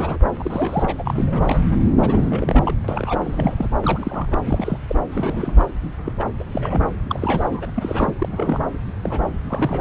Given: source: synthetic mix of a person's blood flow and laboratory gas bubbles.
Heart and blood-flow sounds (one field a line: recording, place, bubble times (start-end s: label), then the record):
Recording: Doppler ultrasound of blood flow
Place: subclavian vein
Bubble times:
0.00-0.18 s: bubbles
0.40-1.66 s: bubbles
2.02-2.74 s: bubbles
2.88-3.20 s: bubbles
3.24-3.69 s: bubbles
3.83-4.40 s: bubbles
4.45-4.79 s: bubbles
4.88-4.96 s: bubbles
5.12-5.67 s: bubbles
6.04-6.12 s: bubbles
6.19-6.25 s: bubbles
6.39-6.44 s: bubbles
6.51-6.89 s: bubbles
7.09-8.14 s: bubbles
8.18-8.28 s: bubbles
8.31-8.77 s: bubbles
9.01-9.21 s: bubbles
9.49-9.81 s: bubbles
From the record:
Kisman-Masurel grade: 342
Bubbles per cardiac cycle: rolling drumbeat, 9 or more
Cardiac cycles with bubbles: 100%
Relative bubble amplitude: moderate (0.250 to 0.450)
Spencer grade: 3 (all of the cardiac periods contain showers or single bubble signals, but not dominating or overriding the cardiac motion signals)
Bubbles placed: anywhere in the cardiac cycle